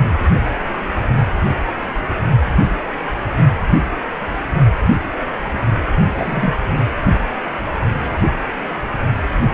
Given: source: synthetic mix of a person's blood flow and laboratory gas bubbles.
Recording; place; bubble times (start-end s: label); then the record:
Doppler ultrasound of blood flow; precordium
6.18-6.53 s: bubbles
From the record:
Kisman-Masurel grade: 212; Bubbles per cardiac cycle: several, 3 to 8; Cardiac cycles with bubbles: 1 to 10%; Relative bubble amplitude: moderate (0.250 to 0.450); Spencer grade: 1 (occasional bubble signal discernible with the cardiac motion signal, with majority of cardiac periods free of bubbles); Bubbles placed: only in the low amplitude regions of the cardiac cycle